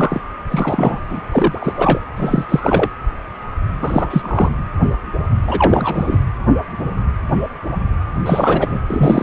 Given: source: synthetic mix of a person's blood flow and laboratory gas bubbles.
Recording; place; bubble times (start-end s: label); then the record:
Doppler ultrasound of blood flow; precordium
0.00-0.21 s: bubbles
0.50-1.00 s: bubbles
1.09-1.20 s: bubbles
1.31-2.00 s: bubbles
2.17-2.45 s: bubbles
2.48-2.89 s: bubbles
3.77-4.49 s: bubbles
5.47-6.19 s: bubbles
8.25-8.79 s: bubbles
8.89-9.23 s: bubbles
From the record:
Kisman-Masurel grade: 333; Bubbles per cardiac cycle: rolling drumbeat, 9 or more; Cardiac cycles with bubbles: 50 to 99%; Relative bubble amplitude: loud (0.450 to 0.775); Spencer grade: 3 (all of the cardiac periods contain showers or single bubble signals, but not dominating or overriding the cardiac motion signals); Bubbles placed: anywhere in the cardiac cycle